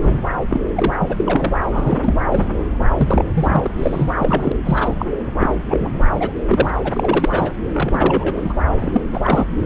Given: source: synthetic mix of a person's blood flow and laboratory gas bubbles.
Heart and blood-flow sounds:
Doppler ultrasound of blood flow; subclavian vein
0.00-0.18 s: bubbles
0.50-0.61 s: bubbles
0.75-0.93 s: bubbles
0.99-1.53 s: bubbles
1.71-2.13 s: bubbles
2.27-2.44 s: bubbles
2.97-3.23 s: bubbles
3.34-3.71 s: bubbles
3.78-4.12 s: bubbles
4.19-4.52 s: bubbles
4.64-5.06 s: bubbles
5.39-5.55 s: bubbles
5.70-6.03 s: bubbles
6.14-6.32 s: bubbles
6.48-6.70 s: bubbles
6.84-7.56 s: bubbles
7.73-8.54 s: bubbles
8.79-9.01 s: bubbles
9.12-9.46 s: bubbles
From the record:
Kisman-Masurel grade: 343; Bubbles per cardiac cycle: rolling drumbeat, 9 or more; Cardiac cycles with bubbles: 100%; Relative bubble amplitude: loud (0.450 to 0.775); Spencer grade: 3 (all of the cardiac periods contain showers or single bubble signals, but not dominating or overriding the cardiac motion signals); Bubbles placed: anywhere in the cardiac cycle

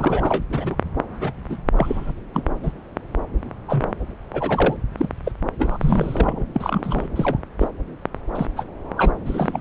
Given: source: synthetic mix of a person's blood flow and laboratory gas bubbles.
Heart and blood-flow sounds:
Doppler ultrasound of blood flow; subclavian vein
0.00-0.45 s: bubbles
0.49-0.76 s: bubbles
1.09-1.33 s: bubbles
1.49-1.57 s: bubbles
1.76-2.13 s: bubbles
2.34-2.43 s: bubbles
2.63-2.72 s: bubbles
3.68-3.93 s: bubbles
4.33-4.77 s: bubbles
4.97-5.09 s: bubbles
5.25-5.32 s: bubbles
5.58-6.46 s: bubbles
6.54-7.07 s: bubbles
7.16-7.37 s: bubbles
7.58-7.69 s: bubbles
8.35-8.46 s: bubbles
8.56-8.64 s: bubbles
8.97-9.12 s: bubbles
9.26-9.60 s: bubbles
From the record:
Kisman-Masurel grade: 242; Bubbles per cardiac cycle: several, 3 to 8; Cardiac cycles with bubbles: 100%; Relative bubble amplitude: moderate (0.250 to 0.450); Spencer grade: 3 (all of the cardiac periods contain showers or single bubble signals, but not dominating or overriding the cardiac motion signals); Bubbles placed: anywhere in the cardiac cycle

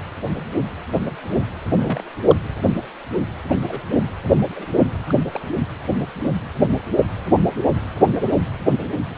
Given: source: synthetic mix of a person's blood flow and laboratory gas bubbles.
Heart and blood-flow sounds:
Doppler ultrasound of blood flow; precordium
1.75-2.04 s: bubbles
2.27-2.38 s: bubbles
3.49-3.60 s: bubbles
3.68-3.82 s: bubbles
4.56-4.66 s: bubbles
5.08-5.14 s: bubbles
5.32-5.40 s: bubbles
From the record:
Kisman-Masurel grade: 121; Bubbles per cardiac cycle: 1 to 2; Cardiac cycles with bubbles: 10 to 50%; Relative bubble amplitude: barely perceptible (0.100 to 0.250); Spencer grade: 2 (many but less than half of the cardiac periods contain bubble signals, singularly or in groups); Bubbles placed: anywhere in the cardiac cycle

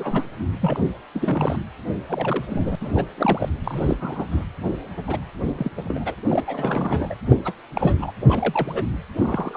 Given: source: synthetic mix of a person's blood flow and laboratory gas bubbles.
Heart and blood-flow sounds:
Doppler ultrasound of blood flow; precordium
0.00-0.24 s: bubbles
0.61-0.79 s: bubbles
1.14-1.56 s: bubbles
2.07-2.45 s: bubbles
2.50-2.75 s: bubbles
2.81-3.07 s: bubbles
3.17-3.50 s: bubbles
3.63-3.97 s: bubbles
4.00-4.25 s: bubbles
4.31-4.44 s: bubbles
5.08-5.18 s: bubbles
5.58-5.71 s: bubbles
5.76-6.14 s: bubbles
6.29-6.43 s: bubbles
6.46-7.15 s: bubbles
7.28-7.37 s: bubbles
7.44-7.53 s: bubbles
7.74-8.12 s: bubbles
8.28-8.83 s: bubbles
9.18-9.57 s: bubbles
From the record:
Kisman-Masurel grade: 242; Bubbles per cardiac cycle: several, 3 to 8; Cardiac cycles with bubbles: 100%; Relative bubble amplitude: moderate (0.250 to 0.450); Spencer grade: 3 (all of the cardiac periods contain showers or single bubble signals, but not dominating or overriding the cardiac motion signals); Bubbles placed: anywhere in the cardiac cycle

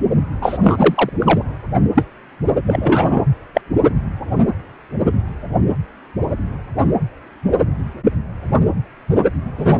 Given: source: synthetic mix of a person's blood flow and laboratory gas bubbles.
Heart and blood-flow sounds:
Doppler ultrasound of blood flow; precordium
0.41-0.58 s: bubbles
0.64-1.09 s: bubbles
1.19-1.43 s: bubbles
1.96-2.06 s: bubbles
2.65-3.25 s: bubbles
3.54-3.61 s: bubbles
9.57-9.79 s: bubbles
From the record:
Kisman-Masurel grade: 233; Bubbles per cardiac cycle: several, 3 to 8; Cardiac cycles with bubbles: 50 to 99%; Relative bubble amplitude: loud (0.450 to 0.775); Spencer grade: 3 (all of the cardiac periods contain showers or single bubble signals, but not dominating or overriding the cardiac motion signals); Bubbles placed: only in the low amplitude regions of the cardiac cycle

